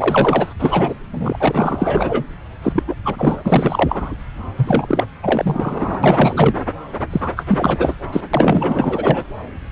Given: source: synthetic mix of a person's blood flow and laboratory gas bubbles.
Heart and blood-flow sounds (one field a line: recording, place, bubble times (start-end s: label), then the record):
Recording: Doppler ultrasound of blood flow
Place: subclavian vein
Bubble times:
0.00-0.54 s: bubbles
0.59-0.94 s: bubbles
1.11-2.24 s: bubbles
2.62-2.83 s: bubbles
2.87-2.94 s: bubbles
3.04-4.12 s: bubbles
4.56-5.06 s: bubbles
5.22-6.00 s: bubbles
6.03-6.63 s: bubbles
7.10-7.31 s: bubbles
7.36-7.45 s: bubbles
7.47-7.96 s: bubbles
8.12-8.21 s: bubbles
8.33-9.23 s: bubbles
From the record:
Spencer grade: 4 (maximum detectable bubble signal sounding continuously throughout systole and diastole of every cardiac period, and overriding the amplitude of the normal cardiac signals)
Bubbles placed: anywhere in the cardiac cycle